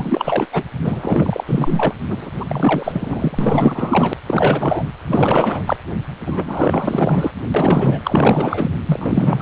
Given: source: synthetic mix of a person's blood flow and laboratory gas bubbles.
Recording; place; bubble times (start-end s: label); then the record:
Doppler ultrasound of blood flow; precordium
0.00-0.46 s: bubbles
0.52-0.64 s: bubbles
0.83-1.44 s: bubbles
1.47-1.93 s: bubbles
2.08-2.32 s: bubbles
2.34-4.13 s: bubbles
4.26-4.87 s: bubbles
5.07-5.62 s: bubbles
5.66-5.77 s: bubbles
6.25-7.31 s: bubbles
7.54-8.00 s: bubbles
8.04-8.71 s: bubbles
8.86-9.42 s: bubbles
From the record:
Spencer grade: 4 (maximum detectable bubble signal sounding continuously throughout systole and diastole of every cardiac period, and overriding the amplitude of the normal cardiac signals); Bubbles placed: anywhere in the cardiac cycle